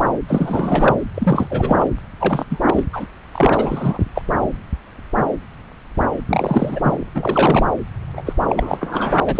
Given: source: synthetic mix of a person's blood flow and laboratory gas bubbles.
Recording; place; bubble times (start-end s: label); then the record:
Doppler ultrasound of blood flow; subclavian vein
0.27-0.96 s: bubbles
1.14-1.89 s: bubbles
2.18-2.45 s: bubbles
2.49-2.60 s: bubbles
2.65-2.84 s: bubbles
2.92-3.06 s: bubbles
3.31-4.05 s: bubbles
4.15-4.21 s: bubbles
6.27-6.98 s: bubbles
7.14-7.67 s: bubbles
8.17-8.21 s: bubbles
8.26-8.33 s: bubbles
8.46-8.78 s: bubbles
8.80-9.40 s: bubbles
From the record:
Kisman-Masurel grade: 333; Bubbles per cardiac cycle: rolling drumbeat, 9 or more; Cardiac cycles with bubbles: 50 to 99%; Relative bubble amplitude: loud (0.450 to 0.775); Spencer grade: 3 (all of the cardiac periods contain showers or single bubble signals, but not dominating or overriding the cardiac motion signals); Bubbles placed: anywhere in the cardiac cycle